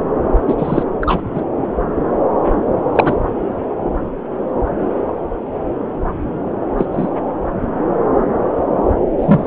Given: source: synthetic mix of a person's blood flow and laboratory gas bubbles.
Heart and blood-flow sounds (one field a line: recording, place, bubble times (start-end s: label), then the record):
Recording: Doppler ultrasound of blood flow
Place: subclavian vein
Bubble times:
0.47-0.55 s: bubbles
0.58-0.83 s: bubbles
1.01-1.21 s: bubbles
1.34-1.42 s: bubbles
2.95-3.19 s: bubbles
6.77-6.86 s: bubbles
6.92-7.10 s: bubbles
9.18-9.47 s: bubbles
From the record:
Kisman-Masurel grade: 123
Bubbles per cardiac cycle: 1 to 2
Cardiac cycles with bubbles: 10 to 50%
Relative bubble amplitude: loud (0.450 to 0.775)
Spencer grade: 2 (many but less than half of the cardiac periods contain bubble signals, singularly or in groups)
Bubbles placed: anywhere in the cardiac cycle